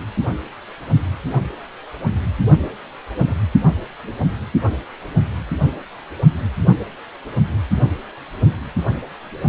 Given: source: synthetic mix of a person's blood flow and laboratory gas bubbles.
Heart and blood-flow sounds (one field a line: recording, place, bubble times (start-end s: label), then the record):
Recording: Doppler ultrasound of blood flow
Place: precordium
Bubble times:
3.26-3.36 s: bubbles
From the record:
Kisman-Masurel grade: 111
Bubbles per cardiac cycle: 1 to 2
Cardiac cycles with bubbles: 1 to 10%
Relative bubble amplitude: barely perceptible (0.100 to 0.250)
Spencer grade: 1 (occasional bubble signal discernible with the cardiac motion signal, with majority of cardiac periods free of bubbles)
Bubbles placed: only in the low amplitude regions of the cardiac cycle